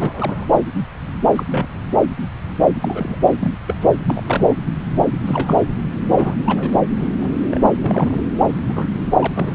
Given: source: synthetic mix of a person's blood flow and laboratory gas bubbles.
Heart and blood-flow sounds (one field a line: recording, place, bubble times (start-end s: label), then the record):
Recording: Doppler ultrasound of blood flow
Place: subclavian vein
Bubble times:
0.00-0.45 s: bubbles
1.35-1.44 s: bubbles
1.51-1.67 s: bubbles
2.82-3.18 s: bubbles
3.39-3.52 s: bubbles
3.67-3.75 s: bubbles
3.80-3.90 s: bubbles
4.04-4.22 s: bubbles
4.26-4.54 s: bubbles
5.25-5.62 s: bubbles
6.09-6.34 s: bubbles
6.44-6.78 s: bubbles
6.95-7.08 s: bubbles
7.20-7.32 s: bubbles
7.50-7.60 s: bubbles
7.79-8.24 s: bubbles
8.48-8.57 s: bubbles
8.67-8.88 s: bubbles
9.20-9.27 s: bubbles
9.32-9.55 s: bubbles
From the record:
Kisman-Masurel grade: 232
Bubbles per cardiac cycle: several, 3 to 8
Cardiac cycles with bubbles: 50 to 99%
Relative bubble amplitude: moderate (0.250 to 0.450)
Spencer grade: 3 (all of the cardiac periods contain showers or single bubble signals, but not dominating or overriding the cardiac motion signals)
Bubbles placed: anywhere in the cardiac cycle